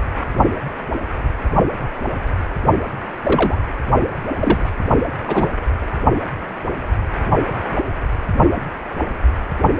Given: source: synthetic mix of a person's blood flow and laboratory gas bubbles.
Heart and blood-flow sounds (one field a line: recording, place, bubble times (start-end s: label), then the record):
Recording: Doppler ultrasound of blood flow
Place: precordium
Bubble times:
3.24-3.56 s: bubbles
4.37-4.76 s: bubbles
5.27-5.49 s: bubbles
From the record:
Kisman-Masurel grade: 123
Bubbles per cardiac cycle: 1 to 2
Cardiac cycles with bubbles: 10 to 50%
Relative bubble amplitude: loud (0.450 to 0.775)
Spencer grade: 2 (many but less than half of the cardiac periods contain bubble signals, singularly or in groups)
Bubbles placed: anywhere in the cardiac cycle